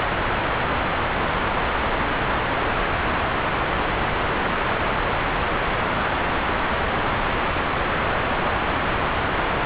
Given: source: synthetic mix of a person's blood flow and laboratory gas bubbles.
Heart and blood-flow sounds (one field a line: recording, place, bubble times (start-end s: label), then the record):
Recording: Doppler ultrasound of blood flow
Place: subclavian vein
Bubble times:
no bubbles
From the record:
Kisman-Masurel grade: 000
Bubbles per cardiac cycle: 0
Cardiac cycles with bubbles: 0%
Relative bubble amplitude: no bubbles discernible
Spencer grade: 0 (complete lack of bubble signals)